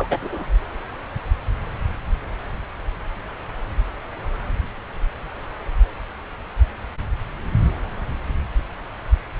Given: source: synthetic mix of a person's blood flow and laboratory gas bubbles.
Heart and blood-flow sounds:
Doppler ultrasound of blood flow; subclavian vein
0.00-0.18 s: bubbles
0.21-0.45 s: bubbles
From the record:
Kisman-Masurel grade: 212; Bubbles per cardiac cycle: several, 3 to 8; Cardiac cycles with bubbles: 1 to 10%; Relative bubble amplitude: moderate (0.250 to 0.450); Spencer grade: 1 (occasional bubble signal discernible with the cardiac motion signal, with majority of cardiac periods free of bubbles); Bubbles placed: anywhere in the cardiac cycle

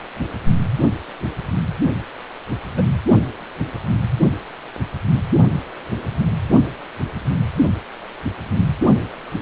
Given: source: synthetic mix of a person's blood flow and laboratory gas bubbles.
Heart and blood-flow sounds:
Doppler ultrasound of blood flow; precordium
2.77-2.82 s: bubbles
From the record:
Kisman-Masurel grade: 112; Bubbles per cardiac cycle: 1 to 2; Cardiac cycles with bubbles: 1 to 10%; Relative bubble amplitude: moderate (0.250 to 0.450); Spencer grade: 1 (occasional bubble signal discernible with the cardiac motion signal, with majority of cardiac periods free of bubbles); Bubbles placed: only in the low amplitude regions of the cardiac cycle

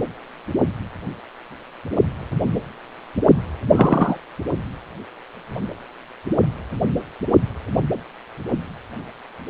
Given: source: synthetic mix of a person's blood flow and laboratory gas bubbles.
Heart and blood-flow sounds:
Doppler ultrasound of blood flow; precordium
3.71-4.17 s: bubbles
From the record:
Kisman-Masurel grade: 113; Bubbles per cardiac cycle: 1 to 2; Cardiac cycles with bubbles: 1 to 10%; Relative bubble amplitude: loud (0.450 to 0.775); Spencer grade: 1 (occasional bubble signal discernible with the cardiac motion signal, with majority of cardiac periods free of bubbles); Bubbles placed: anywhere in the cardiac cycle

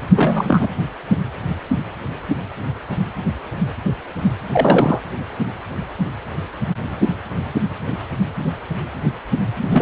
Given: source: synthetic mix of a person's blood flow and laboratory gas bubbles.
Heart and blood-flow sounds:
Doppler ultrasound of blood flow; precordium
0.15-0.68 s: bubbles
4.51-5.00 s: bubbles
9.61-9.82 s: bubbles
From the record:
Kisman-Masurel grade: 223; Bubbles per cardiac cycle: several, 3 to 8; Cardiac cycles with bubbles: 10 to 50%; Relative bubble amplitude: loud (0.450 to 0.775); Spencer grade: 2 (many but less than half of the cardiac periods contain bubble signals, singularly or in groups); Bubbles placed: anywhere in the cardiac cycle

